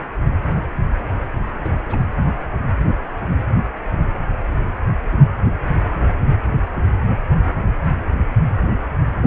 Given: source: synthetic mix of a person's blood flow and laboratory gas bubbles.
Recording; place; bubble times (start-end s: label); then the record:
Doppler ultrasound of blood flow; precordium
1.60-1.80 s: bubbles
1.84-2.05 s: bubbles
From the record:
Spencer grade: 1 (occasional bubble signal discernible with the cardiac motion signal, with majority of cardiac periods free of bubbles); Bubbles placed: anywhere in the cardiac cycle